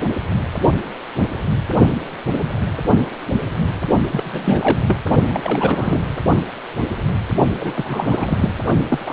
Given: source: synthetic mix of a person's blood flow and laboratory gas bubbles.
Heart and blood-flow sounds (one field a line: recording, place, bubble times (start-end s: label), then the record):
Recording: Doppler ultrasound of blood flow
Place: precordium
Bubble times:
4.12-4.79 s: bubbles
4.88-4.96 s: bubbles
5.28-6.02 s: bubbles
7.56-8.53 s: bubbles
8.89-8.99 s: bubbles
9.05-9.13 s: bubbles
From the record:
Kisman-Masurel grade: 332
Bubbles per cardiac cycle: rolling drumbeat, 9 or more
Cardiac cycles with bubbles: 50 to 99%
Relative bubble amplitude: moderate (0.250 to 0.450)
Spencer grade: 3 (all of the cardiac periods contain showers or single bubble signals, but not dominating or overriding the cardiac motion signals)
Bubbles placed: only in the low amplitude regions of the cardiac cycle